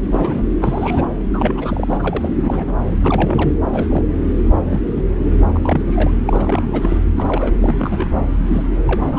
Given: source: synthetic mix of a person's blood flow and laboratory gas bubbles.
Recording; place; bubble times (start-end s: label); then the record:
Doppler ultrasound of blood flow; subclavian vein
0.05-0.43 s: bubbles
0.60-1.06 s: bubbles
1.33-2.30 s: bubbles
2.43-2.90 s: bubbles
2.97-3.52 s: bubbles
3.72-3.88 s: bubbles
3.91-4.03 s: bubbles
4.70-4.81 s: bubbles
4.96-5.03 s: bubbles
5.54-5.82 s: bubbles
5.87-6.12 s: bubbles
6.25-6.67 s: bubbles
6.71-6.99 s: bubbles
7.16-7.52 s: bubbles
7.61-7.75 s: bubbles
7.79-8.07 s: bubbles
8.46-8.63 s: bubbles
8.87-8.96 s: bubbles
9.05-9.19 s: bubbles
From the record:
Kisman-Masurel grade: 232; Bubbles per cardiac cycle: several, 3 to 8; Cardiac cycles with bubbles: 50 to 99%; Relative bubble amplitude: moderate (0.250 to 0.450); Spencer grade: 3 (all of the cardiac periods contain showers or single bubble signals, but not dominating or overriding the cardiac motion signals); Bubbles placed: anywhere in the cardiac cycle